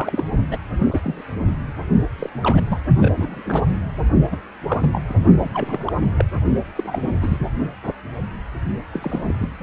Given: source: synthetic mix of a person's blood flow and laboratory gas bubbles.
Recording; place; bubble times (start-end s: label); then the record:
Doppler ultrasound of blood flow; precordium
0.00-0.23 s: bubbles
0.50-0.57 s: bubbles
0.79-1.00 s: bubbles
1.03-1.23 s: bubbles
2.18-2.29 s: bubbles
2.43-2.61 s: bubbles
2.68-2.81 s: bubbles
3.00-3.10 s: bubbles
3.15-3.63 s: bubbles
3.66-3.81 s: bubbles
4.30-4.37 s: bubbles
4.67-5.00 s: bubbles
5.09-5.14 s: bubbles
5.39-5.49 s: bubbles
5.54-6.06 s: bubbles
6.17-6.25 s: bubbles
6.75-7.17 s: bubbles
7.21-7.38 s: bubbles
8.94-9.35 s: bubbles
9.39-9.49 s: bubbles
From the record:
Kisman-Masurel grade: 232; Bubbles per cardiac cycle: several, 3 to 8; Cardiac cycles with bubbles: 50 to 99%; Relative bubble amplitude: moderate (0.250 to 0.450); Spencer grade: 3 (all of the cardiac periods contain showers or single bubble signals, but not dominating or overriding the cardiac motion signals); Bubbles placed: only in the low amplitude regions of the cardiac cycle